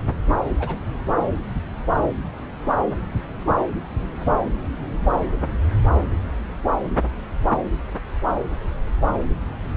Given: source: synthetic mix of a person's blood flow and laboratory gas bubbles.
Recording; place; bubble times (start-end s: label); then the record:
Doppler ultrasound of blood flow; subclavian vein
0.57-0.79 s: bubbles
From the record:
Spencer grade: 1 (occasional bubble signal discernible with the cardiac motion signal, with majority of cardiac periods free of bubbles); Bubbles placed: anywhere in the cardiac cycle